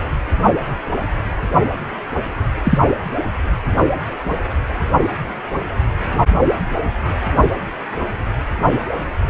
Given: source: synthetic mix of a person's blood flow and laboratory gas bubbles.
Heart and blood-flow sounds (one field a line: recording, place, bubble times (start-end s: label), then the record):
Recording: Doppler ultrasound of blood flow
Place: precordium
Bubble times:
2.63-2.78 s: bubbles
From the record:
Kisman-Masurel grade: 113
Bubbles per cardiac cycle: 1 to 2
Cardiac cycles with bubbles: 1 to 10%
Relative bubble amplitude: loud (0.450 to 0.775)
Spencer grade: 1 (occasional bubble signal discernible with the cardiac motion signal, with majority of cardiac periods free of bubbles)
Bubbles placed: anywhere in the cardiac cycle